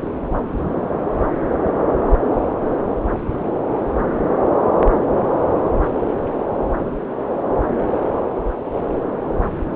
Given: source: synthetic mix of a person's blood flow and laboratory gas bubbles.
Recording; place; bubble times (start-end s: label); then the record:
Doppler ultrasound of blood flow; subclavian vein
no bubbles
From the record:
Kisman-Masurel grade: 000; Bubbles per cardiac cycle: 0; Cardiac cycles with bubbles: 0%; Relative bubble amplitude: no bubbles discernible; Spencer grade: 0 (complete lack of bubble signals)